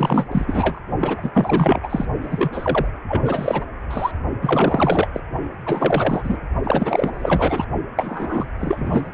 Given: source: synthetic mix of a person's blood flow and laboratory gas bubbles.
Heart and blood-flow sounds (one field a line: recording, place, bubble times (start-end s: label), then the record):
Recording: Doppler ultrasound of blood flow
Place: precordium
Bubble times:
0.00-0.27 s: bubbles
0.31-0.79 s: bubbles
1.00-1.80 s: bubbles
1.82-2.05 s: bubbles
2.21-2.88 s: bubbles
3.08-3.65 s: bubbles
3.90-4.12 s: bubbles
4.41-5.10 s: bubbles
5.13-5.21 s: bubbles
5.66-6.37 s: bubbles
6.64-7.65 s: bubbles
7.97-8.49 s: bubbles
8.58-9.10 s: bubbles
From the record:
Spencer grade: 4 (maximum detectable bubble signal sounding continuously throughout systole and diastole of every cardiac period, and overriding the amplitude of the normal cardiac signals)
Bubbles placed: only in the low amplitude regions of the cardiac cycle